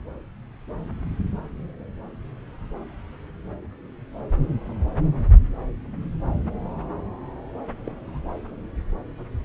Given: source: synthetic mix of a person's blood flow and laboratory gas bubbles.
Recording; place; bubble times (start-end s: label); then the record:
Doppler ultrasound of blood flow; subclavian vein
7.86-8.19 s: bubbles
From the record:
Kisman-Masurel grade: 111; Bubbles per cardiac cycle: 1 to 2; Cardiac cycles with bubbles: 1 to 10%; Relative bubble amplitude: barely perceptible (0.100 to 0.250); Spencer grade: 1 (occasional bubble signal discernible with the cardiac motion signal, with majority of cardiac periods free of bubbles); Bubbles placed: anywhere in the cardiac cycle